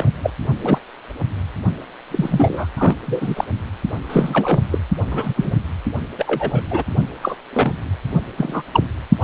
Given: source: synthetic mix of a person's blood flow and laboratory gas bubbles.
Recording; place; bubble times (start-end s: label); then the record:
Doppler ultrasound of blood flow; precordium
0.00-0.10 s: bubbles
0.22-0.31 s: bubbles
0.61-0.79 s: bubbles
2.10-2.67 s: bubbles
2.77-2.96 s: bubbles
3.06-3.44 s: bubbles
4.08-4.60 s: bubbles
4.72-4.79 s: bubbles
5.11-5.53 s: bubbles
6.18-6.63 s: bubbles
6.71-6.83 s: bubbles
7.22-7.36 s: bubbles
7.53-7.72 s: bubbles
8.38-8.62 s: bubbles
8.72-8.84 s: bubbles
9.21-9.23 s: bubbles
From the record:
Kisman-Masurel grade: 243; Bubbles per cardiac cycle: several, 3 to 8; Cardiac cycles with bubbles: 100%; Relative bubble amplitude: loud (0.450 to 0.775); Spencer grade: 3 (all of the cardiac periods contain showers or single bubble signals, but not dominating or overriding the cardiac motion signals); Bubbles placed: only in the low amplitude regions of the cardiac cycle